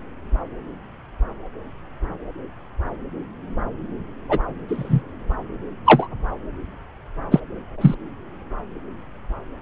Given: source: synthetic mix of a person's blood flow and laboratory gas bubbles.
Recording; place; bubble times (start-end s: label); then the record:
Doppler ultrasound of blood flow; subclavian vein
4.29-4.38 s: bubbles
4.68-5.03 s: bubbles
5.85-6.08 s: bubbles
7.31-7.39 s: bubbles
7.80-7.95 s: bubbles
From the record:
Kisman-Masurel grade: 123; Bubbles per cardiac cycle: 1 to 2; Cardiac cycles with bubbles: 10 to 50%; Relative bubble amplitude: loud (0.450 to 0.775); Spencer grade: 2 (many but less than half of the cardiac periods contain bubble signals, singularly or in groups); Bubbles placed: anywhere in the cardiac cycle